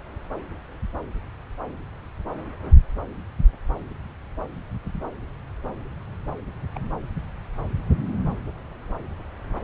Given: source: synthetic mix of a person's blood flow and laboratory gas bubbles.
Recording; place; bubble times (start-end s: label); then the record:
Doppler ultrasound of blood flow; subclavian vein
6.38-6.42 s: bubbles
6.75-6.79 s: bubbles
From the record:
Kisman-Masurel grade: 111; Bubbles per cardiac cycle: 1 to 2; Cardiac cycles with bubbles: 1 to 10%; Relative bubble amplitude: barely perceptible (0.100 to 0.250); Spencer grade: 1 (occasional bubble signal discernible with the cardiac motion signal, with majority of cardiac periods free of bubbles); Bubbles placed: anywhere in the cardiac cycle